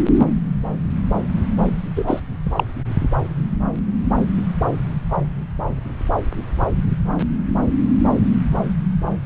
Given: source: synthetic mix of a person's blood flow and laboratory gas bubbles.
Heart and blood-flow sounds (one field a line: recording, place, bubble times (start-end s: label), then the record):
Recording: Doppler ultrasound of blood flow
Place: subclavian vein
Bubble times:
1.63-1.69 s: bubbles
1.95-2.20 s: bubbles
2.45-2.51 s: bubbles
2.56-2.64 s: bubbles
From the record:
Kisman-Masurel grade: 212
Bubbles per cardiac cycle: several, 3 to 8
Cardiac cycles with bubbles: 1 to 10%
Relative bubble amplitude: moderate (0.250 to 0.450)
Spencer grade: 1 (occasional bubble signal discernible with the cardiac motion signal, with majority of cardiac periods free of bubbles)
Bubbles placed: anywhere in the cardiac cycle